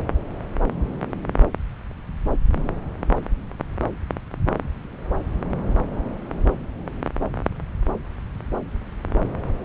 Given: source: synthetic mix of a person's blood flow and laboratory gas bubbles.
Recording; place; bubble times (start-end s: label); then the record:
Doppler ultrasound of blood flow; subclavian vein
no bubbles
From the record:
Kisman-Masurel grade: 000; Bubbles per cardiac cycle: 0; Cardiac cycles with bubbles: 0%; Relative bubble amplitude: no bubbles discernible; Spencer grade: 0 (complete lack of bubble signals)